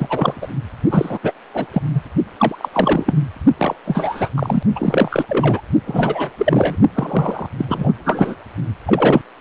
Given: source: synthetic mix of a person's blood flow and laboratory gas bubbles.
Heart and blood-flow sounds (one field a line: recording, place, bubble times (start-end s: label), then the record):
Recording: Doppler ultrasound of blood flow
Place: precordium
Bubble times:
0.00-0.47 s: bubbles
0.90-1.19 s: bubbles
1.23-1.33 s: bubbles
1.54-1.67 s: bubbles
1.73-1.81 s: bubbles
1.93-2.01 s: bubbles
2.38-2.69 s: bubbles
2.73-3.14 s: bubbles
3.58-3.75 s: bubbles
3.84-4.29 s: bubbles
4.36-4.63 s: bubbles
4.75-5.25 s: bubbles
5.28-5.61 s: bubbles
5.86-6.29 s: bubbles
6.38-6.75 s: bubbles
6.94-7.46 s: bubbles
7.57-7.65 s: bubbles
7.68-7.92 s: bubbles
8.05-8.36 s: bubbles
8.86-9.22 s: bubbles
From the record:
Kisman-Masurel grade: 343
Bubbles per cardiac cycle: rolling drumbeat, 9 or more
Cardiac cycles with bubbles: 100%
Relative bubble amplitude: loud (0.450 to 0.775)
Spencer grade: 3 (all of the cardiac periods contain showers or single bubble signals, but not dominating or overriding the cardiac motion signals)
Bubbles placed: only in the low amplitude regions of the cardiac cycle